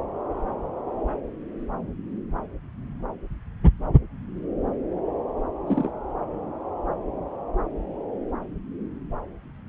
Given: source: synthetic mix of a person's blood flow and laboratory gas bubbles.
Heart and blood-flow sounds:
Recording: Doppler ultrasound of blood flow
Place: subclavian vein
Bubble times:
5.67-5.90 s: bubbles
From the record:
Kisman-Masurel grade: 112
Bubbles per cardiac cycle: 1 to 2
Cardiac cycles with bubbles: 1 to 10%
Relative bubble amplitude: moderate (0.250 to 0.450)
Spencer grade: 1 (occasional bubble signal discernible with the cardiac motion signal, with majority of cardiac periods free of bubbles)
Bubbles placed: anywhere in the cardiac cycle

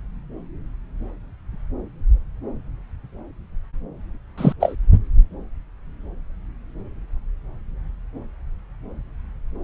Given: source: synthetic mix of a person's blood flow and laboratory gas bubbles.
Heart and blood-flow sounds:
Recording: Doppler ultrasound of blood flow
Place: subclavian vein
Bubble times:
4.38-4.53 s: bubbles
4.60-4.75 s: bubbles
From the record:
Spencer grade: 1 (occasional bubble signal discernible with the cardiac motion signal, with majority of cardiac periods free of bubbles)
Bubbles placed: anywhere in the cardiac cycle

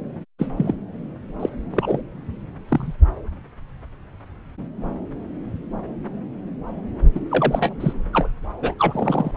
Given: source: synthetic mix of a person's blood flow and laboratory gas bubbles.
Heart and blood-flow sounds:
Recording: Doppler ultrasound of blood flow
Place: subclavian vein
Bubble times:
0.38-0.46 s: bubbles
0.57-0.73 s: bubbles
1.40-1.49 s: bubbles
1.70-2.02 s: bubbles
2.69-2.95 s: bubbles
7.15-7.21 s: bubbles
7.29-7.71 s: bubbles
7.79-7.93 s: bubbles
8.13-8.29 s: bubbles
8.62-8.74 s: bubbles
8.78-9.31 s: bubbles
From the record:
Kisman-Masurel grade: 222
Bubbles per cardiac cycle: several, 3 to 8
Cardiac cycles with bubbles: 10 to 50%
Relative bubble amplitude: moderate (0.250 to 0.450)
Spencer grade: 2 (many but less than half of the cardiac periods contain bubble signals, singularly or in groups)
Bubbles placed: anywhere in the cardiac cycle

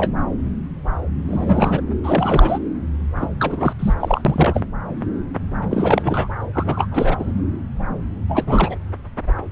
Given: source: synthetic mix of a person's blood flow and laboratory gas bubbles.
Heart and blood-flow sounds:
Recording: Doppler ultrasound of blood flow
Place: subclavian vein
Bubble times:
0.00-0.12 s: bubbles
1.27-1.81 s: bubbles
2.03-2.58 s: bubbles
3.15-3.29 s: bubbles
3.40-3.73 s: bubbles
3.79-3.94 s: bubbles
3.99-4.21 s: bubbles
4.25-4.61 s: bubbles
5.71-6.29 s: bubbles
6.53-6.87 s: bubbles
6.91-7.17 s: bubbles
7.19-7.32 s: bubbles
8.27-8.75 s: bubbles
From the record:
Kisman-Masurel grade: 332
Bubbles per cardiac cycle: rolling drumbeat, 9 or more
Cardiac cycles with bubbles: 50 to 99%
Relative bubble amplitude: moderate (0.250 to 0.450)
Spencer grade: 3 (all of the cardiac periods contain showers or single bubble signals, but not dominating or overriding the cardiac motion signals)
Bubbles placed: anywhere in the cardiac cycle

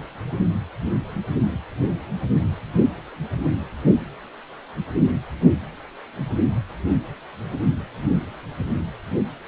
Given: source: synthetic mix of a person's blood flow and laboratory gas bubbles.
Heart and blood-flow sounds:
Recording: Doppler ultrasound of blood flow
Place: precordium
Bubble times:
no bubbles
From the record:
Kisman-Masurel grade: 000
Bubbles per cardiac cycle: 0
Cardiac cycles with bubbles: 0%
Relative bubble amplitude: no bubbles discernible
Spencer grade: 0 (complete lack of bubble signals)

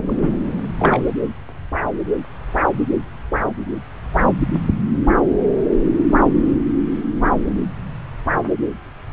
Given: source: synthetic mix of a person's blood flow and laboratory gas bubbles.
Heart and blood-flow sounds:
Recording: Doppler ultrasound of blood flow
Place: subclavian vein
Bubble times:
0.06-0.38 s: bubbles
0.77-1.03 s: bubbles
From the record:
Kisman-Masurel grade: 222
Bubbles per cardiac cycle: several, 3 to 8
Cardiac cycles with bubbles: 10 to 50%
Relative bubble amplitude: moderate (0.250 to 0.450)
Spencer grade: 2 (many but less than half of the cardiac periods contain bubble signals, singularly or in groups)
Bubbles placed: anywhere in the cardiac cycle

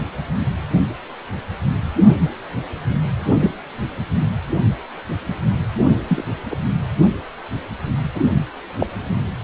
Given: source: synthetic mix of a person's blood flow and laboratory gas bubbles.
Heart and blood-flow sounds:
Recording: Doppler ultrasound of blood flow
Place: precordium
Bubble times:
2.07-2.15 s: bubbles
3.20-3.53 s: bubbles
6.07-6.24 s: bubbles
6.50-6.57 s: bubbles
8.15-8.21 s: bubbles
8.80-8.87 s: bubbles
From the record:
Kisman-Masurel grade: 122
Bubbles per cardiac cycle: 1 to 2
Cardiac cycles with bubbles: 10 to 50%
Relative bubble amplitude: moderate (0.250 to 0.450)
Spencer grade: 2 (many but less than half of the cardiac periods contain bubble signals, singularly or in groups)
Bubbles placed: anywhere in the cardiac cycle

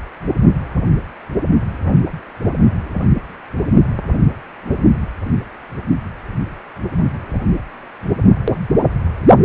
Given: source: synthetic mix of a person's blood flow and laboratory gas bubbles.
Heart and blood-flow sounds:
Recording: Doppler ultrasound of blood flow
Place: precordium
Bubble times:
no bubbles
From the record:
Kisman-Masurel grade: 000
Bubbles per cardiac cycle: 0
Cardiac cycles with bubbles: 0%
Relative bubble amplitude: no bubbles discernible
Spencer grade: 0 (complete lack of bubble signals)

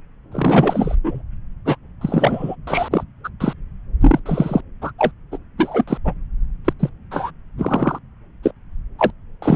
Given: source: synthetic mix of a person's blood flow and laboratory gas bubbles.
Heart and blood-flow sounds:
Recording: Doppler ultrasound of blood flow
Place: subclavian vein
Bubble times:
0.32-0.95 s: bubbles
1.04-1.22 s: bubbles
1.65-1.77 s: bubbles
2.01-2.56 s: bubbles
2.67-2.89 s: bubbles
2.91-3.04 s: bubbles
3.23-3.29 s: bubbles
3.40-3.53 s: bubbles
4.00-4.20 s: bubbles
4.25-4.61 s: bubbles
4.82-4.92 s: bubbles
4.98-5.12 s: bubbles
5.32-5.38 s: bubbles
5.58-5.84 s: bubbles
5.87-5.97 s: bubbles
6.04-6.13 s: bubbles
6.65-6.73 s: bubbles
6.79-6.90 s: bubbles
7.11-7.31 s: bubbles
7.58-7.99 s: bubbles
8.43-8.51 s: bubbles
8.98-9.11 s: bubbles
9.42-9.56 s: bubbles
From the record:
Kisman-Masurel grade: 243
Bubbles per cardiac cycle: several, 3 to 8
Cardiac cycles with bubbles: 100%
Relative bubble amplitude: loud (0.450 to 0.775)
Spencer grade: 3 (all of the cardiac periods contain showers or single bubble signals, but not dominating or overriding the cardiac motion signals)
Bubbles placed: anywhere in the cardiac cycle

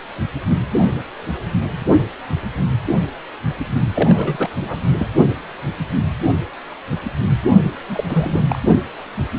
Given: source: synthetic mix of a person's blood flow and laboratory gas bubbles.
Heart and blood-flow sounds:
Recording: Doppler ultrasound of blood flow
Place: precordium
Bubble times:
3.95-4.49 s: bubbles
4.60-4.80 s: bubbles
4.97-5.06 s: bubbles
7.89-8.04 s: bubbles
8.09-8.43 s: bubbles
8.48-8.59 s: bubbles
From the record:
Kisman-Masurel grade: 222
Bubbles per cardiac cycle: several, 3 to 8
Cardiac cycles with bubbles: 10 to 50%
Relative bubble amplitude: moderate (0.250 to 0.450)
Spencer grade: 2 (many but less than half of the cardiac periods contain bubble signals, singularly or in groups)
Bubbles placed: only in the low amplitude regions of the cardiac cycle

